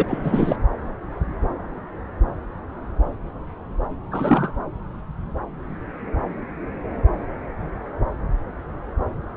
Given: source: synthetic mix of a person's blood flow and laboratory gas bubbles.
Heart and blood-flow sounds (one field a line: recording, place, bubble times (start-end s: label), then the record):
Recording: Doppler ultrasound of blood flow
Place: subclavian vein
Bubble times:
0.00-0.56 s: bubbles
4.11-4.52 s: bubbles
From the record:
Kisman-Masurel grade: 223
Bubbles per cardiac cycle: several, 3 to 8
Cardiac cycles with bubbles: 10 to 50%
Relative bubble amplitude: loud (0.450 to 0.775)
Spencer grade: 2 (many but less than half of the cardiac periods contain bubble signals, singularly or in groups)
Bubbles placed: anywhere in the cardiac cycle